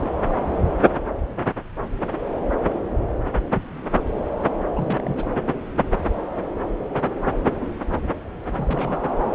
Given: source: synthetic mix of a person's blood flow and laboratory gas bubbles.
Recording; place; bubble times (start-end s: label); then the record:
Doppler ultrasound of blood flow; subclavian vein
0.00-0.09 s: bubbles
4.75-5.34 s: bubbles
8.51-9.01 s: bubbles
From the record:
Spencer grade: 2 (many but less than half of the cardiac periods contain bubble signals, singularly or in groups); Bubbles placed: anywhere in the cardiac cycle